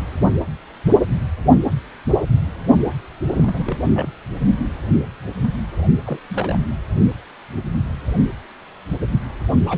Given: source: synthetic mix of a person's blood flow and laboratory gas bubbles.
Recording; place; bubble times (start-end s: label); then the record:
Doppler ultrasound of blood flow; precordium
3.27-3.77 s: bubbles
3.93-4.06 s: bubbles
6.04-6.19 s: bubbles
6.30-6.58 s: bubbles
9.67-9.78 s: bubbles
From the record:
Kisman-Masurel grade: 221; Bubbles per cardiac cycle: several, 3 to 8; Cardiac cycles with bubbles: 10 to 50%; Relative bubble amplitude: barely perceptible (0.100 to 0.250); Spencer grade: 2 (many but less than half of the cardiac periods contain bubble signals, singularly or in groups); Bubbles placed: only in the low amplitude regions of the cardiac cycle